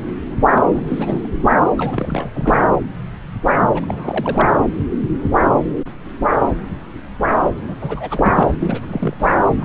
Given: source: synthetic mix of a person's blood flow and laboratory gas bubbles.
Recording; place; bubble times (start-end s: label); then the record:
Doppler ultrasound of blood flow; subclavian vein
0.54-0.61 s: bubbles
0.72-0.82 s: bubbles
0.87-1.30 s: bubbles
1.76-2.29 s: bubbles
2.34-2.73 s: bubbles
3.74-4.51 s: bubbles
7.62-7.75 s: bubbles
7.81-8.53 s: bubbles
8.61-8.80 s: bubbles
8.88-9.14 s: bubbles
9.19-9.36 s: bubbles
9.59-9.65 s: bubbles
From the record:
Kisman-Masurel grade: 332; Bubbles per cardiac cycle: rolling drumbeat, 9 or more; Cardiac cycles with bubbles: 50 to 99%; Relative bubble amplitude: moderate (0.250 to 0.450); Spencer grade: 3 (all of the cardiac periods contain showers or single bubble signals, but not dominating or overriding the cardiac motion signals); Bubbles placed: anywhere in the cardiac cycle